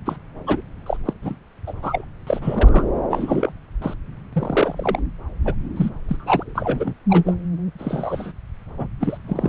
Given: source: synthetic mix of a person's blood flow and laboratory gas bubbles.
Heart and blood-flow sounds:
Doppler ultrasound of blood flow; subclavian vein
0.05-0.17 s: bubbles
0.47-0.61 s: bubbles
0.86-0.97 s: bubbles
1.05-1.14 s: bubbles
1.23-1.36 s: bubbles
1.67-1.74 s: bubbles
1.82-2.04 s: bubbles
2.26-2.85 s: bubbles
3.10-3.52 s: bubbles
3.81-3.94 s: bubbles
4.33-4.99 s: bubbles
5.45-5.54 s: bubbles
5.76-5.90 s: bubbles
6.08-6.94 s: bubbles
7.09-7.36 s: bubbles
7.79-8.32 s: bubbles
8.73-8.93 s: bubbles
9.00-9.18 s: bubbles
9.27-9.49 s: bubbles
From the record:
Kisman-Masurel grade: 242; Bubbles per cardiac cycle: several, 3 to 8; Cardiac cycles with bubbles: 100%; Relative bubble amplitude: moderate (0.250 to 0.450); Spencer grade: 3 (all of the cardiac periods contain showers or single bubble signals, but not dominating or overriding the cardiac motion signals); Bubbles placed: anywhere in the cardiac cycle

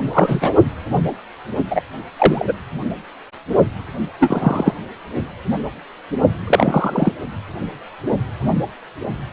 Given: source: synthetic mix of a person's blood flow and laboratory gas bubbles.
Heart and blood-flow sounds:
Doppler ultrasound of blood flow; precordium
0.13-0.54 s: bubbles
1.70-1.82 s: bubbles
2.17-2.54 s: bubbles
4.20-4.74 s: bubbles
6.47-7.12 s: bubbles
From the record:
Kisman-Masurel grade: 223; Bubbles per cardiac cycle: several, 3 to 8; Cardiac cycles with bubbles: 10 to 50%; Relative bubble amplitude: loud (0.450 to 0.775); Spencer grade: 2 (many but less than half of the cardiac periods contain bubble signals, singularly or in groups); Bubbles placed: anywhere in the cardiac cycle

